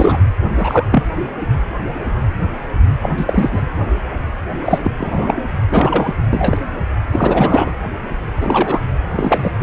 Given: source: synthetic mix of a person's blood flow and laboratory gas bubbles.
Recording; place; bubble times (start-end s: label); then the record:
Doppler ultrasound of blood flow; precordium
0.00-0.20 s: bubbles
0.57-0.85 s: bubbles
0.91-1.03 s: bubbles
3.02-3.10 s: bubbles
3.17-3.62 s: bubbles
4.65-4.81 s: bubbles
4.84-4.92 s: bubbles
4.98-5.43 s: bubbles
5.71-6.13 s: bubbles
6.29-6.58 s: bubbles
7.12-7.71 s: bubbles
8.40-8.83 s: bubbles
9.15-9.52 s: bubbles
9.60-9.63 s: bubbles
From the record:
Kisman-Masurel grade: 233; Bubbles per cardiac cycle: several, 3 to 8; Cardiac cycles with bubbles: 50 to 99%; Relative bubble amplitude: loud (0.450 to 0.775); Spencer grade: 3 (all of the cardiac periods contain showers or single bubble signals, but not dominating or overriding the cardiac motion signals); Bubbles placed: anywhere in the cardiac cycle